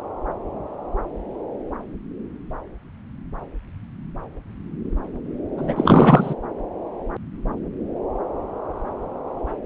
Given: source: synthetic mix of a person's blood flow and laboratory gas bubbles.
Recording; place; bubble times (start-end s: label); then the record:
Doppler ultrasound of blood flow; subclavian vein
5.57-6.34 s: bubbles
From the record:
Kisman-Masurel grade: 213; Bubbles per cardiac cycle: several, 3 to 8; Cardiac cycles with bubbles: 1 to 10%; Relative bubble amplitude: loud (0.450 to 0.775); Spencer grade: 1 (occasional bubble signal discernible with the cardiac motion signal, with majority of cardiac periods free of bubbles); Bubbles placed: anywhere in the cardiac cycle